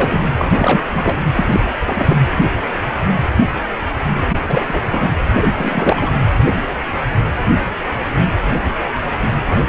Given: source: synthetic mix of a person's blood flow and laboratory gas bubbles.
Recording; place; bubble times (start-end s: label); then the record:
Doppler ultrasound of blood flow; precordium
0.00-0.28 s: bubbles
0.38-0.82 s: bubbles
0.90-1.22 s: bubbles
1.36-1.62 s: bubbles
1.85-2.17 s: bubbles
4.29-4.38 s: bubbles
4.42-4.81 s: bubbles
4.91-5.08 s: bubbles
5.34-5.52 s: bubbles
5.57-6.10 s: bubbles
9.45-9.58 s: bubbles
From the record:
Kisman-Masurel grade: 222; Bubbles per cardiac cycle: several, 3 to 8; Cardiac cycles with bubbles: 10 to 50%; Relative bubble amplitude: moderate (0.250 to 0.450); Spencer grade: 2 (many but less than half of the cardiac periods contain bubble signals, singularly or in groups); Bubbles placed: anywhere in the cardiac cycle